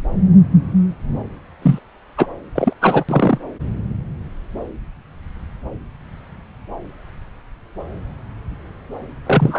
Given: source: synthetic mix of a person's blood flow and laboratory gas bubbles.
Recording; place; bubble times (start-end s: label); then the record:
Doppler ultrasound of blood flow; subclavian vein
1.62-1.79 s: bubbles
2.17-2.27 s: bubbles
2.54-2.73 s: bubbles
2.81-3.04 s: bubbles
3.08-3.38 s: bubbles
9.26-9.59 s: bubbles
From the record:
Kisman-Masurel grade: 223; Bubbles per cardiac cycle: several, 3 to 8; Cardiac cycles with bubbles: 10 to 50%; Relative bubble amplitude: loud (0.450 to 0.775); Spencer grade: 2 (many but less than half of the cardiac periods contain bubble signals, singularly or in groups); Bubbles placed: anywhere in the cardiac cycle